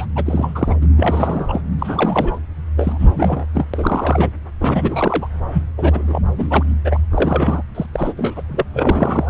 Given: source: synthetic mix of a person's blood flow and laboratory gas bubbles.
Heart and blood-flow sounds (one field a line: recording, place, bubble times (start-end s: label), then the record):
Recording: Doppler ultrasound of blood flow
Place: subclavian vein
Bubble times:
0.00-0.07 s: bubbles
0.16-0.76 s: bubbles
0.81-0.87 s: bubbles
0.97-1.61 s: bubbles
1.79-2.38 s: bubbles
2.77-3.46 s: bubbles
3.54-3.65 s: bubbles
3.73-4.30 s: bubbles
4.61-5.27 s: bubbles
5.53-5.66 s: bubbles
5.78-6.21 s: bubbles
6.37-6.64 s: bubbles
6.84-7.00 s: bubbles
7.11-7.62 s: bubbles
7.75-7.86 s: bubbles
7.93-8.13 s: bubbles
8.16-8.42 s: bubbles
8.49-8.64 s: bubbles
8.73-9.30 s: bubbles
From the record:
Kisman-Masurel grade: 332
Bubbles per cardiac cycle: rolling drumbeat, 9 or more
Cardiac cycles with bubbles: 50 to 99%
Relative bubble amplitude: moderate (0.250 to 0.450)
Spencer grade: 3 (all of the cardiac periods contain showers or single bubble signals, but not dominating or overriding the cardiac motion signals)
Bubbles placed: anywhere in the cardiac cycle